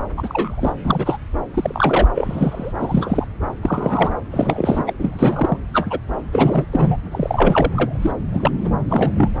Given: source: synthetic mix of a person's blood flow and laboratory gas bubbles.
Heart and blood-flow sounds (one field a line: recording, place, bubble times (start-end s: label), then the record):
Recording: Doppler ultrasound of blood flow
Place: subclavian vein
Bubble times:
0.17-0.73 s: bubbles
0.83-1.18 s: bubbles
1.54-2.08 s: bubbles
2.15-2.73 s: bubbles
2.79-3.25 s: bubbles
3.62-4.16 s: bubbles
4.30-4.94 s: bubbles
4.99-5.58 s: bubbles
5.73-5.99 s: bubbles
6.32-6.65 s: bubbles
6.71-6.96 s: bubbles
7.11-7.99 s: bubbles
8.02-8.12 s: bubbles
8.32-8.52 s: bubbles
8.64-8.71 s: bubbles
8.88-9.29 s: bubbles
From the record:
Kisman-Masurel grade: 243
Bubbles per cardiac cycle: several, 3 to 8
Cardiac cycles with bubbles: 100%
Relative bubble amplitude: loud (0.450 to 0.775)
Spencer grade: 3 (all of the cardiac periods contain showers or single bubble signals, but not dominating or overriding the cardiac motion signals)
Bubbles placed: anywhere in the cardiac cycle